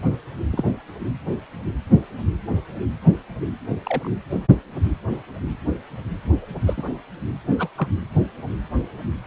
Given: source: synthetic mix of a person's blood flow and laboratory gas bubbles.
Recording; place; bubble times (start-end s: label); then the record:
Doppler ultrasound of blood flow; precordium
0.52-0.65 s: bubbles
3.85-4.09 s: bubbles
6.66-6.82 s: bubbles
7.59-7.70 s: bubbles
7.76-7.88 s: bubbles
From the record:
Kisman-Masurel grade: 122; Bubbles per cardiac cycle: 1 to 2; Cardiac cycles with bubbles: 10 to 50%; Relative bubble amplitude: moderate (0.250 to 0.450); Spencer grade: 2 (many but less than half of the cardiac periods contain bubble signals, singularly or in groups); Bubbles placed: anywhere in the cardiac cycle